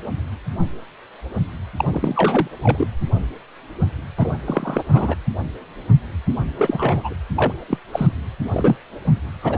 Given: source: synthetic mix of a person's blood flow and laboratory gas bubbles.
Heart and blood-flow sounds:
Doppler ultrasound of blood flow; precordium
1.77-2.47 s: bubbles
2.63-2.87 s: bubbles
4.17-4.33 s: bubbles
4.45-4.83 s: bubbles
4.88-5.16 s: bubbles
6.58-7.14 s: bubbles
7.36-7.52 s: bubbles
7.69-7.78 s: bubbles
7.93-8.07 s: bubbles
8.52-8.77 s: bubbles
9.42-9.58 s: bubbles
From the record:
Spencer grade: 3 (all of the cardiac periods contain showers or single bubble signals, but not dominating or overriding the cardiac motion signals); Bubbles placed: anywhere in the cardiac cycle

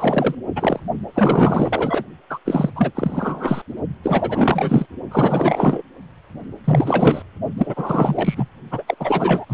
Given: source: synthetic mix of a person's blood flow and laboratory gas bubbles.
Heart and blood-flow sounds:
Doppler ultrasound of blood flow; precordium
0.00-0.35 s: bubbles
0.55-0.79 s: bubbles
1.14-2.04 s: bubbles
2.29-2.38 s: bubbles
2.45-2.70 s: bubbles
2.75-2.92 s: bubbles
2.95-3.62 s: bubbles
4.03-4.86 s: bubbles
5.11-5.83 s: bubbles
6.64-7.22 s: bubbles
7.57-8.49 s: bubbles
8.71-8.84 s: bubbles
8.87-8.95 s: bubbles
8.99-9.45 s: bubbles
9.48-9.54 s: bubbles
From the record:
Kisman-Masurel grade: 444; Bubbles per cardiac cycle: continuous sound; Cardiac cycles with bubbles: 100%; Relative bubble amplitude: maximal (0.775 to 0.999); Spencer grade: 4 (maximum detectable bubble signal sounding continuously throughout systole and diastole of every cardiac period, and overriding the amplitude of the normal cardiac signals); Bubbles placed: only in the low amplitude regions of the cardiac cycle

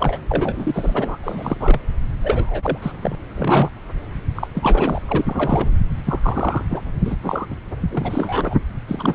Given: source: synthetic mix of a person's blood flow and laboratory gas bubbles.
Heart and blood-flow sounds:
Doppler ultrasound of blood flow; subclavian vein
0.00-0.20 s: bubbles
0.29-1.17 s: bubbles
1.23-1.81 s: bubbles
2.22-2.78 s: bubbles
2.82-2.92 s: bubbles
3.01-3.16 s: bubbles
3.34-3.70 s: bubbles
4.35-4.48 s: bubbles
4.54-5.02 s: bubbles
5.08-5.71 s: bubbles
6.06-6.66 s: bubbles
6.70-6.82 s: bubbles
7.06-7.17 s: bubbles
7.23-7.46 s: bubbles
7.50-7.56 s: bubbles
7.81-8.55 s: bubbles
8.68-8.70 s: bubbles
8.87-9.15 s: bubbles
From the record:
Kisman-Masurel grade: 342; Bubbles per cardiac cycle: rolling drumbeat, 9 or more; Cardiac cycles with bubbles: 100%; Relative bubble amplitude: moderate (0.250 to 0.450); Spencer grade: 3 (all of the cardiac periods contain showers or single bubble signals, but not dominating or overriding the cardiac motion signals); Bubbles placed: anywhere in the cardiac cycle

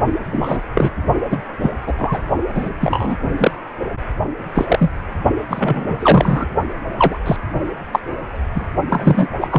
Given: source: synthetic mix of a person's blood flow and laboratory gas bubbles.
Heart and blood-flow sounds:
Doppler ultrasound of blood flow; precordium
0.32-0.60 s: bubbles
0.74-0.90 s: bubbles
1.30-1.41 s: bubbles
1.59-1.72 s: bubbles
1.86-1.94 s: bubbles
1.98-2.22 s: bubbles
2.54-2.70 s: bubbles
2.81-3.17 s: bubbles
3.38-3.51 s: bubbles
4.54-4.65 s: bubbles
4.67-4.90 s: bubbles
5.48-6.46 s: bubbles
6.97-7.19 s: bubbles
7.25-7.36 s: bubbles
7.92-8.00 s: bubbles
8.54-8.66 s: bubbles
8.89-9.28 s: bubbles
9.41-9.59 s: bubbles
From the record:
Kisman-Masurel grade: 243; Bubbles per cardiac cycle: several, 3 to 8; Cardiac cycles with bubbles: 100%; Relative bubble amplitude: loud (0.450 to 0.775); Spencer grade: 3 (all of the cardiac periods contain showers or single bubble signals, but not dominating or overriding the cardiac motion signals); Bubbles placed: only in the low amplitude regions of the cardiac cycle

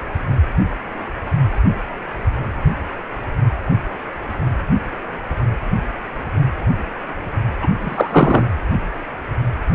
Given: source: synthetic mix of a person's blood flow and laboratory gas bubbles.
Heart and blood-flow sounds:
Doppler ultrasound of blood flow; precordium
7.60-7.67 s: bubbles
7.81-8.50 s: bubbles
From the record:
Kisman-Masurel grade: 213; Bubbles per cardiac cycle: several, 3 to 8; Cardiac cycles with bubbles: 1 to 10%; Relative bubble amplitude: loud (0.450 to 0.775); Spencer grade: 1 (occasional bubble signal discernible with the cardiac motion signal, with majority of cardiac periods free of bubbles); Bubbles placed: anywhere in the cardiac cycle

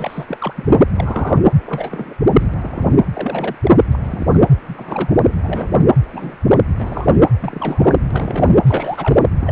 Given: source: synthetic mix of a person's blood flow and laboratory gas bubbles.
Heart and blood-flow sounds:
Doppler ultrasound of blood flow; precordium
0.00-0.24 s: bubbles
0.27-0.81 s: bubbles
0.94-1.42 s: bubbles
1.66-2.14 s: bubbles
2.39-2.50 s: bubbles
2.54-2.88 s: bubbles
3.14-3.56 s: bubbles
3.63-3.71 s: bubbles
3.92-3.99 s: bubbles
4.03-4.26 s: bubbles
4.33-4.38 s: bubbles
4.68-4.74 s: bubbles
4.77-5.14 s: bubbles
5.27-5.34 s: bubbles
5.42-5.75 s: bubbles
6.13-6.36 s: bubbles
6.51-6.58 s: bubbles
6.79-7.21 s: bubbles
7.39-7.96 s: bubbles
8.11-8.62 s: bubbles
8.65-9.19 s: bubbles
9.40-9.52 s: bubbles
From the record:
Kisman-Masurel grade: 242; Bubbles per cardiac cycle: several, 3 to 8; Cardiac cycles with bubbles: 100%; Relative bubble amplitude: moderate (0.250 to 0.450); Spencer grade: 3 (all of the cardiac periods contain showers or single bubble signals, but not dominating or overriding the cardiac motion signals); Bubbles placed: anywhere in the cardiac cycle

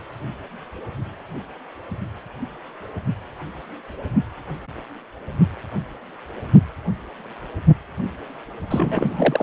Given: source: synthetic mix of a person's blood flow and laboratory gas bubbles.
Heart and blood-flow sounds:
Doppler ultrasound of blood flow; precordium
8.70-9.43 s: bubbles
From the record:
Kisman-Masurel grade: 212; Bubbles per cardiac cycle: several, 3 to 8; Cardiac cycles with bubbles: 1 to 10%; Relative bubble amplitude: moderate (0.250 to 0.450); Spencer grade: 1 (occasional bubble signal discernible with the cardiac motion signal, with majority of cardiac periods free of bubbles); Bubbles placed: anywhere in the cardiac cycle

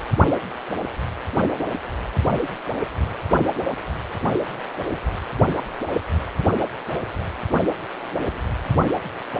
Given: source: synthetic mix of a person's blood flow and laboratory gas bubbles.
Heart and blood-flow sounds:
Doppler ultrasound of blood flow; precordium
no bubbles
From the record:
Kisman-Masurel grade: 000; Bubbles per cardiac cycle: 0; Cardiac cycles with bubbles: 0%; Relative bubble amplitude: no bubbles discernible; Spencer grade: 0 (complete lack of bubble signals)

